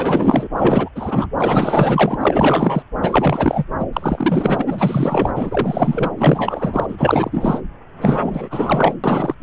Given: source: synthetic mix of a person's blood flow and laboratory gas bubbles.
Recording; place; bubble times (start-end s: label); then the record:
Doppler ultrasound of blood flow; subclavian vein
0.00-0.48 s: bubbles
0.57-0.89 s: bubbles
0.95-1.27 s: bubbles
1.38-2.17 s: bubbles
2.21-2.82 s: bubbles
3.01-3.64 s: bubbles
3.79-3.86 s: bubbles
3.93-5.31 s: bubbles
5.35-6.12 s: bubbles
6.17-7.60 s: bubbles
8.01-8.95 s: bubbles
9.04-9.35 s: bubbles
From the record:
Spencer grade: 4 (maximum detectable bubble signal sounding continuously throughout systole and diastole of every cardiac period, and overriding the amplitude of the normal cardiac signals); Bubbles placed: anywhere in the cardiac cycle